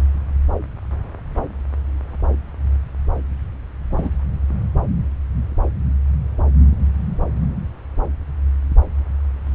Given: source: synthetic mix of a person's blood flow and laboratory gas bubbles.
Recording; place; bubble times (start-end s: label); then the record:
Doppler ultrasound of blood flow; subclavian vein
3.91-4.09 s: bubbles
From the record:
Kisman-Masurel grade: 112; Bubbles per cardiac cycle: 1 to 2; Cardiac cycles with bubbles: 1 to 10%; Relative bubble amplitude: moderate (0.250 to 0.450); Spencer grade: 1 (occasional bubble signal discernible with the cardiac motion signal, with majority of cardiac periods free of bubbles); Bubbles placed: anywhere in the cardiac cycle